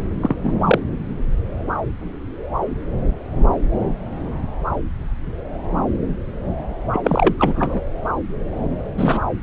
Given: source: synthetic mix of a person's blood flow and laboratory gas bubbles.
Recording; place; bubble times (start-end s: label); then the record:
Doppler ultrasound of blood flow; subclavian vein
0.21-0.35 s: bubbles
0.43-0.58 s: bubbles
0.65-0.78 s: bubbles
6.93-7.01 s: bubbles
7.04-7.35 s: bubbles
7.39-7.81 s: bubbles
8.97-9.20 s: bubbles
From the record:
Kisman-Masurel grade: 223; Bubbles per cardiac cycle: several, 3 to 8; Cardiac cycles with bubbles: 10 to 50%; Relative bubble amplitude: loud (0.450 to 0.775); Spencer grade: 2 (many but less than half of the cardiac periods contain bubble signals, singularly or in groups); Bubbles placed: anywhere in the cardiac cycle